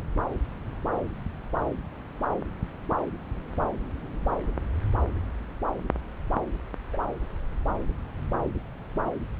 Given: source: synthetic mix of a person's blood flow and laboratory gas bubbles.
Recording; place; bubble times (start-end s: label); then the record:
Doppler ultrasound of blood flow; subclavian vein
6.93-6.97 s: bubbles
From the record:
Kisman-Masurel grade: 111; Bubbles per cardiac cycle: 1 to 2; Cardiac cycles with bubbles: 1 to 10%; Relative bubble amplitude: barely perceptible (0.100 to 0.250); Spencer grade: 1 (occasional bubble signal discernible with the cardiac motion signal, with majority of cardiac periods free of bubbles); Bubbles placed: anywhere in the cardiac cycle